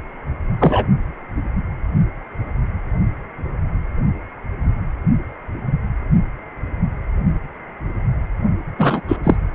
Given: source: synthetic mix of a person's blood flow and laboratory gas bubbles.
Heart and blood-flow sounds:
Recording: Doppler ultrasound of blood flow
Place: precordium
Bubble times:
0.60-0.85 s: bubbles
8.78-9.02 s: bubbles
9.08-9.17 s: bubbles
9.24-9.36 s: bubbles
From the record:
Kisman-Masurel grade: 223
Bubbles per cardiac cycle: several, 3 to 8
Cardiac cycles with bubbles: 10 to 50%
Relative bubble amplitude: loud (0.450 to 0.775)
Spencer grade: 2 (many but less than half of the cardiac periods contain bubble signals, singularly or in groups)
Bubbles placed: only in the low amplitude regions of the cardiac cycle

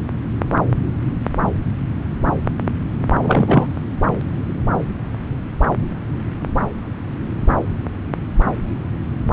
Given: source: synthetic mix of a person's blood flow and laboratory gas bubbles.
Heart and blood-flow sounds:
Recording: Doppler ultrasound of blood flow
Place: subclavian vein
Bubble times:
3.23-3.67 s: bubbles
From the record:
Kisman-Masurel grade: 113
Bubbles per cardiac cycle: 1 to 2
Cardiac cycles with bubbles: 1 to 10%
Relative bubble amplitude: loud (0.450 to 0.775)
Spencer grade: 1 (occasional bubble signal discernible with the cardiac motion signal, with majority of cardiac periods free of bubbles)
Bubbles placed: anywhere in the cardiac cycle

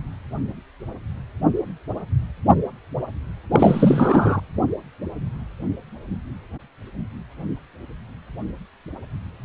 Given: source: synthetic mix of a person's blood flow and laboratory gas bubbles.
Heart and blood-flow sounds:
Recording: Doppler ultrasound of blood flow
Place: precordium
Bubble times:
3.51-4.41 s: bubbles
From the record:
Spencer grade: 1 (occasional bubble signal discernible with the cardiac motion signal, with majority of cardiac periods free of bubbles)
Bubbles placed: anywhere in the cardiac cycle

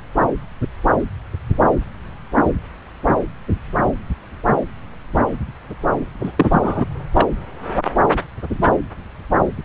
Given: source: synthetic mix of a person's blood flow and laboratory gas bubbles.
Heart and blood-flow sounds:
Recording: Doppler ultrasound of blood flow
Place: subclavian vein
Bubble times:
6.23-6.32 s: bubbles
6.37-6.85 s: bubbles
7.14-7.28 s: bubbles
From the record:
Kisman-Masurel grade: 223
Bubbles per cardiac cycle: several, 3 to 8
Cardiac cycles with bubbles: 10 to 50%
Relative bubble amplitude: loud (0.450 to 0.775)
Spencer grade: 2 (many but less than half of the cardiac periods contain bubble signals, singularly or in groups)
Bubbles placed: anywhere in the cardiac cycle

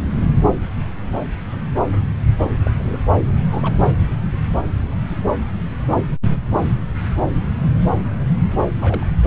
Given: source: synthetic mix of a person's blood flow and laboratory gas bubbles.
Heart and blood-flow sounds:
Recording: Doppler ultrasound of blood flow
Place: subclavian vein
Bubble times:
2.42-2.51 s: bubbles
2.64-2.71 s: bubbles
2.75-3.01 s: bubbles
3.50-3.76 s: bubbles
8.52-9.06 s: bubbles
From the record:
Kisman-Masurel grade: 221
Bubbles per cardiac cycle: several, 3 to 8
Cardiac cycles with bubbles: 10 to 50%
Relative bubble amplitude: barely perceptible (0.100 to 0.250)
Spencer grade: 2 (many but less than half of the cardiac periods contain bubble signals, singularly or in groups)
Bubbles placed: anywhere in the cardiac cycle

